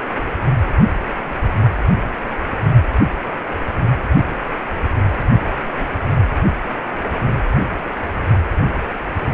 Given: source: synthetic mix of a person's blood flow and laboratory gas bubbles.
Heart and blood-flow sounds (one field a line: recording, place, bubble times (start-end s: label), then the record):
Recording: Doppler ultrasound of blood flow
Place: precordium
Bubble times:
5.80-5.86 s: bubbles
From the record:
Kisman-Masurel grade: 121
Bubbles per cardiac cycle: 1 to 2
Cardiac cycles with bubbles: 10 to 50%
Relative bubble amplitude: barely perceptible (0.100 to 0.250)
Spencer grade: 2 (many but less than half of the cardiac periods contain bubble signals, singularly or in groups)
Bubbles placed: anywhere in the cardiac cycle